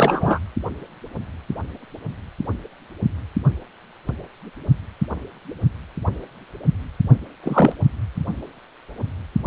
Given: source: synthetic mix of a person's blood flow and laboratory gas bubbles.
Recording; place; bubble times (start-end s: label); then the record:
Doppler ultrasound of blood flow; precordium
0.00-0.39 s: bubbles
7.42-7.73 s: bubbles
From the record:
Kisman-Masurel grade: 223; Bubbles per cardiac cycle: several, 3 to 8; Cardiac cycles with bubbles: 10 to 50%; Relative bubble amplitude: loud (0.450 to 0.775); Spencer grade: 2 (many but less than half of the cardiac periods contain bubble signals, singularly or in groups); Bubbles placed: only in the low amplitude regions of the cardiac cycle